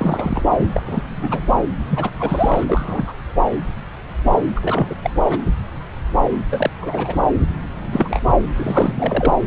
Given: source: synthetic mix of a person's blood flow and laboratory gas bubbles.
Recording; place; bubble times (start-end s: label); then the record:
Doppler ultrasound of blood flow; subclavian vein
0.00-0.42 s: bubbles
0.55-0.68 s: bubbles
0.74-0.82 s: bubbles
0.86-1.02 s: bubbles
1.21-1.40 s: bubbles
1.88-2.10 s: bubbles
2.19-2.65 s: bubbles
2.67-3.13 s: bubbles
4.56-4.96 s: bubbles
5.02-5.10 s: bubbles
5.29-5.38 s: bubbles
6.50-6.70 s: bubbles
6.82-7.16 s: bubbles
7.92-8.19 s: bubbles
8.55-9.33 s: bubbles
From the record:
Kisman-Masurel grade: 232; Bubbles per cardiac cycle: several, 3 to 8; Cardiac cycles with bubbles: 50 to 99%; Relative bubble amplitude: moderate (0.250 to 0.450); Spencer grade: 3 (all of the cardiac periods contain showers or single bubble signals, but not dominating or overriding the cardiac motion signals); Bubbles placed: anywhere in the cardiac cycle